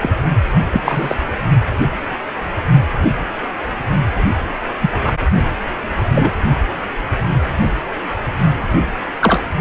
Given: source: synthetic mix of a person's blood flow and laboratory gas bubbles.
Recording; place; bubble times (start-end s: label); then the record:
Doppler ultrasound of blood flow; precordium
0.00-0.10 s: bubbles
0.70-0.81 s: bubbles
0.84-1.15 s: bubbles
4.81-4.90 s: bubbles
5.03-5.12 s: bubbles
6.14-6.31 s: bubbles
9.21-9.40 s: bubbles
From the record:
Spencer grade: 2 (many but less than half of the cardiac periods contain bubble signals, singularly or in groups); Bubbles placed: only in the low amplitude regions of the cardiac cycle